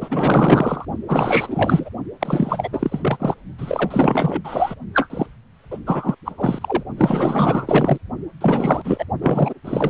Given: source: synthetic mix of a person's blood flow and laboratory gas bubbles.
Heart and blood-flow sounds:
Doppler ultrasound of blood flow; precordium
0.01-0.85 s: bubbles
1.08-1.90 s: bubbles
2.19-2.69 s: bubbles
2.72-3.35 s: bubbles
3.58-4.75 s: bubbles
4.93-5.26 s: bubbles
5.71-5.78 s: bubbles
5.86-6.16 s: bubbles
6.25-6.83 s: bubbles
6.97-7.97 s: bubbles
8.40-9.05 s: bubbles
9.21-9.54 s: bubbles
9.64-9.90 s: bubbles
From the record:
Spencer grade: 4 (maximum detectable bubble signal sounding continuously throughout systole and diastole of every cardiac period, and overriding the amplitude of the normal cardiac signals); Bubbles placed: only in the low amplitude regions of the cardiac cycle

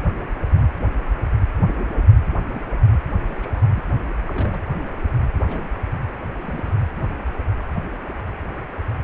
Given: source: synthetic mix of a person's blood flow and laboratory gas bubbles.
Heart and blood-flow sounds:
Doppler ultrasound of blood flow; precordium
2.54-2.62 s: bubbles
3.27-3.72 s: bubbles
3.75-3.83 s: bubbles
4.26-4.63 s: bubbles
5.47-5.69 s: bubbles
6.41-6.75 s: bubbles
From the record:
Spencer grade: 2 (many but less than half of the cardiac periods contain bubble signals, singularly or in groups); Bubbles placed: anywhere in the cardiac cycle

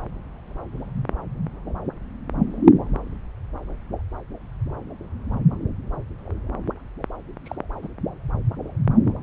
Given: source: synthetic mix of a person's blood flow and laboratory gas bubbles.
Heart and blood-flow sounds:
Doppler ultrasound of blood flow; subclavian vein
7.45-7.55 s: bubbles
7.82-7.88 s: bubbles
From the record:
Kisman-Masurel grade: 111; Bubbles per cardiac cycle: 1 to 2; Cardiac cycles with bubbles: 1 to 10%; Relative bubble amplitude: barely perceptible (0.100 to 0.250); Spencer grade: 1 (occasional bubble signal discernible with the cardiac motion signal, with majority of cardiac periods free of bubbles); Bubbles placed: anywhere in the cardiac cycle

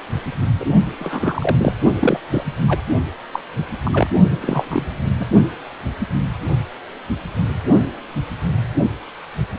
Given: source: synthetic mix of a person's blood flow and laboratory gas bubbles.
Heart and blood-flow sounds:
Doppler ultrasound of blood flow; precordium
0.60-0.64 s: bubbles
0.99-1.73 s: bubbles
2.00-2.18 s: bubbles
2.31-2.44 s: bubbles
2.68-2.83 s: bubbles
3.33-3.40 s: bubbles
3.84-4.08 s: bubbles
4.41-4.87 s: bubbles
5.20-5.25 s: bubbles
From the record:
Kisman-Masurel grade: 222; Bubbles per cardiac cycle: several, 3 to 8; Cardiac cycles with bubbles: 10 to 50%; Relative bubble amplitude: moderate (0.250 to 0.450); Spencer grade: 2 (many but less than half of the cardiac periods contain bubble signals, singularly or in groups); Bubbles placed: only in the low amplitude regions of the cardiac cycle

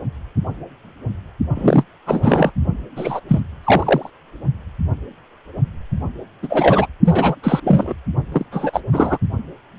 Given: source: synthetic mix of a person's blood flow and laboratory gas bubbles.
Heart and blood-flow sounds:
Doppler ultrasound of blood flow; precordium
1.55-1.84 s: bubbles
2.06-2.52 s: bubbles
2.96-3.20 s: bubbles
3.28-3.40 s: bubbles
3.63-4.10 s: bubbles
6.42-6.86 s: bubbles
7.04-7.35 s: bubbles
7.42-7.60 s: bubbles
7.63-7.93 s: bubbles
8.32-8.45 s: bubbles
8.52-8.80 s: bubbles
8.93-9.18 s: bubbles
From the record:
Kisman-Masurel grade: 233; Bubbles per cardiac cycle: several, 3 to 8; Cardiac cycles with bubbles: 50 to 99%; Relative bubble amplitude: loud (0.450 to 0.775); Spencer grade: 3 (all of the cardiac periods contain showers or single bubble signals, but not dominating or overriding the cardiac motion signals); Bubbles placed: only in the low amplitude regions of the cardiac cycle

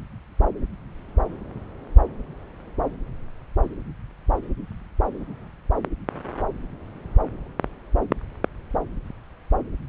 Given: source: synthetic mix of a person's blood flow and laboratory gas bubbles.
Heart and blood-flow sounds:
Doppler ultrasound of blood flow; subclavian vein
no bubbles
From the record:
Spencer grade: 0 (complete lack of bubble signals)

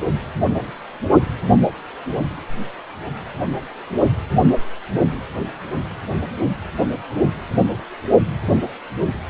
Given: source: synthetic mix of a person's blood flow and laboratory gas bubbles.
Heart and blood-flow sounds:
Doppler ultrasound of blood flow; precordium
no bubbles
From the record:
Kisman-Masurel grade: 000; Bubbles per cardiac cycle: 0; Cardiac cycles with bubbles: 0%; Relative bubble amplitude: no bubbles discernible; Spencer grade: 0 (complete lack of bubble signals)

